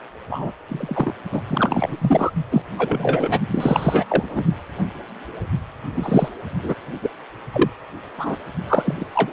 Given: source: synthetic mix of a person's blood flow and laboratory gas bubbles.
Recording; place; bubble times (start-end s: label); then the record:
Doppler ultrasound of blood flow; precordium
0.30-0.52 s: bubbles
0.69-1.13 s: bubbles
1.31-1.42 s: bubbles
1.49-2.31 s: bubbles
2.50-2.62 s: bubbles
2.77-3.39 s: bubbles
3.48-4.06 s: bubbles
4.10-4.45 s: bubbles
5.94-6.29 s: bubbles
6.63-6.74 s: bubbles
7.02-7.10 s: bubbles
7.53-7.71 s: bubbles
8.18-8.37 s: bubbles
8.66-9.06 s: bubbles
9.15-9.33 s: bubbles
From the record:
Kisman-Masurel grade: 232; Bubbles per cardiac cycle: several, 3 to 8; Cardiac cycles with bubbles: 50 to 99%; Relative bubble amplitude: moderate (0.250 to 0.450); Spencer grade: 3 (all of the cardiac periods contain showers or single bubble signals, but not dominating or overriding the cardiac motion signals); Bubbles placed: only in the low amplitude regions of the cardiac cycle